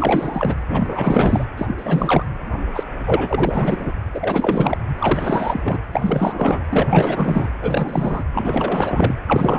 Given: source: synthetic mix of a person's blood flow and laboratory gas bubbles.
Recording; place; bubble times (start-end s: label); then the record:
Doppler ultrasound of blood flow; precordium
0.00-0.55 s: bubbles
0.69-1.45 s: bubbles
1.58-2.24 s: bubbles
2.74-2.83 s: bubbles
3.05-3.92 s: bubbles
4.13-4.77 s: bubbles
4.97-5.79 s: bubbles
5.92-6.64 s: bubbles
6.70-7.50 s: bubbles
7.61-8.24 s: bubbles
8.33-9.13 s: bubbles
9.27-9.59 s: bubbles
From the record:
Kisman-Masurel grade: 444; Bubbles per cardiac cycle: continuous sound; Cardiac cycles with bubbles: 100%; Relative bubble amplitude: maximal (0.775 to 0.999); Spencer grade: 4 (maximum detectable bubble signal sounding continuously throughout systole and diastole of every cardiac period, and overriding the amplitude of the normal cardiac signals); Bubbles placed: anywhere in the cardiac cycle